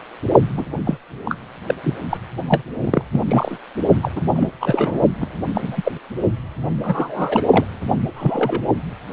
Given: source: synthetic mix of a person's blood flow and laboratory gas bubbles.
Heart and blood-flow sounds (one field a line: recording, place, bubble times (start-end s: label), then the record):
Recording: Doppler ultrasound of blood flow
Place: precordium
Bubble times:
0.57-0.65 s: bubbles
0.85-0.97 s: bubbles
1.25-1.35 s: bubbles
1.66-1.75 s: bubbles
1.83-1.94 s: bubbles
2.10-2.18 s: bubbles
2.48-2.62 s: bubbles
2.81-3.02 s: bubbles
3.12-3.21 s: bubbles
3.27-3.58 s: bubbles
4.02-4.11 s: bubbles
4.16-4.21 s: bubbles
4.35-4.49 s: bubbles
4.61-4.99 s: bubbles
5.21-5.27 s: bubbles
5.54-5.92 s: bubbles
6.83-7.42 s: bubbles
7.51-7.65 s: bubbles
8.15-8.62 s: bubbles
9.10-9.13 s: bubbles
From the record:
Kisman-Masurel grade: 242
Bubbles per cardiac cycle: several, 3 to 8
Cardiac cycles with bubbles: 100%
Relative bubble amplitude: moderate (0.250 to 0.450)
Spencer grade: 3 (all of the cardiac periods contain showers or single bubble signals, but not dominating or overriding the cardiac motion signals)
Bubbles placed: only in the low amplitude regions of the cardiac cycle